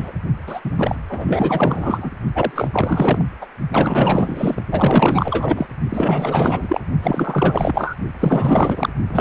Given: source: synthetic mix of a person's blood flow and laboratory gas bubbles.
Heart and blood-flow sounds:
Doppler ultrasound of blood flow; precordium
0.00-0.12 s: bubbles
0.46-0.60 s: bubbles
0.64-0.72 s: bubbles
0.76-0.96 s: bubbles
1.09-2.11 s: bubbles
2.35-3.25 s: bubbles
3.41-3.46 s: bubbles
3.71-4.62 s: bubbles
4.71-5.66 s: bubbles
5.89-6.80 s: bubbles
7.02-7.95 s: bubbles
8.20-8.89 s: bubbles
9.09-9.21 s: bubbles
From the record:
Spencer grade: 4 (maximum detectable bubble signal sounding continuously throughout systole and diastole of every cardiac period, and overriding the amplitude of the normal cardiac signals); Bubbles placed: only in the low amplitude regions of the cardiac cycle

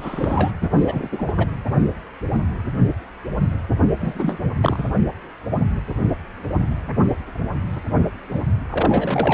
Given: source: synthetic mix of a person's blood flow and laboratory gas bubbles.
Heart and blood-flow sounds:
Doppler ultrasound of blood flow; precordium
0.00-0.52 s: bubbles
0.61-0.69 s: bubbles
0.76-1.08 s: bubbles
1.11-1.50 s: bubbles
3.99-4.38 s: bubbles
4.61-4.84 s: bubbles
8.69-9.34 s: bubbles
From the record:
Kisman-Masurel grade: 332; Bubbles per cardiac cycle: rolling drumbeat, 9 or more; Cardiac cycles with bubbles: 50 to 99%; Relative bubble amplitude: moderate (0.250 to 0.450); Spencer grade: 3 (all of the cardiac periods contain showers or single bubble signals, but not dominating or overriding the cardiac motion signals); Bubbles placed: anywhere in the cardiac cycle

